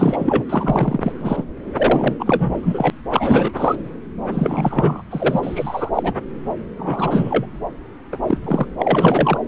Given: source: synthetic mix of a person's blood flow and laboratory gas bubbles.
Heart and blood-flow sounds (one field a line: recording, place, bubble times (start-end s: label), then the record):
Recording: Doppler ultrasound of blood flow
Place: subclavian vein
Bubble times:
0.00-0.44 s: bubbles
0.49-1.12 s: bubbles
1.20-1.45 s: bubbles
1.77-2.15 s: bubbles
2.19-2.90 s: bubbles
3.10-3.52 s: bubbles
3.56-3.76 s: bubbles
4.30-5.02 s: bubbles
5.10-5.90 s: bubbles
5.94-6.14 s: bubbles
6.77-7.46 s: bubbles
8.12-8.17 s: bubbles
8.26-8.38 s: bubbles
8.44-8.66 s: bubbles
8.79-9.38 s: bubbles
From the record:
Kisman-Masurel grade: 343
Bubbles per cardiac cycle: rolling drumbeat, 9 or more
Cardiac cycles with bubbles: 100%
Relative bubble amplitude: loud (0.450 to 0.775)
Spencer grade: 3 (all of the cardiac periods contain showers or single bubble signals, but not dominating or overriding the cardiac motion signals)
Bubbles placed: anywhere in the cardiac cycle